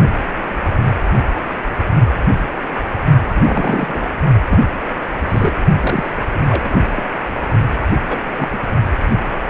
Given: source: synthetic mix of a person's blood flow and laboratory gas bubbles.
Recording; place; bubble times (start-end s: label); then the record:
Doppler ultrasound of blood flow; precordium
3.28-4.07 s: bubbles
4.48-4.58 s: bubbles
5.29-5.53 s: bubbles
5.81-6.08 s: bubbles
6.33-6.40 s: bubbles
6.50-6.83 s: bubbles
6.96-7.02 s: bubbles
8.08-8.22 s: bubbles
8.39-8.48 s: bubbles
8.52-8.59 s: bubbles
From the record:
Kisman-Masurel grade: 232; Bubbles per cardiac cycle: several, 3 to 8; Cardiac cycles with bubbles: 50 to 99%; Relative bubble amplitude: moderate (0.250 to 0.450); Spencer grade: 3 (all of the cardiac periods contain showers or single bubble signals, but not dominating or overriding the cardiac motion signals); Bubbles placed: only in the low amplitude regions of the cardiac cycle